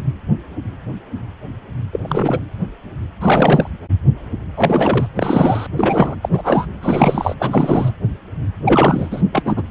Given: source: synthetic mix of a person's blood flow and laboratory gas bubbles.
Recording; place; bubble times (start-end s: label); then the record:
Doppler ultrasound of blood flow; precordium
1.92-2.00 s: bubbles
2.03-2.40 s: bubbles
3.21-3.71 s: bubbles
4.55-5.07 s: bubbles
5.16-5.67 s: bubbles
5.77-6.16 s: bubbles
6.22-6.29 s: bubbles
6.32-6.66 s: bubbles
6.82-7.35 s: bubbles
7.39-7.92 s: bubbles
8.65-9.22 s: bubbles
9.33-9.62 s: bubbles
From the record:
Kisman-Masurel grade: 333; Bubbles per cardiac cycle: rolling drumbeat, 9 or more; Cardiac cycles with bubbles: 50 to 99%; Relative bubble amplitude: loud (0.450 to 0.775); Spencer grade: 3 (all of the cardiac periods contain showers or single bubble signals, but not dominating or overriding the cardiac motion signals); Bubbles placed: anywhere in the cardiac cycle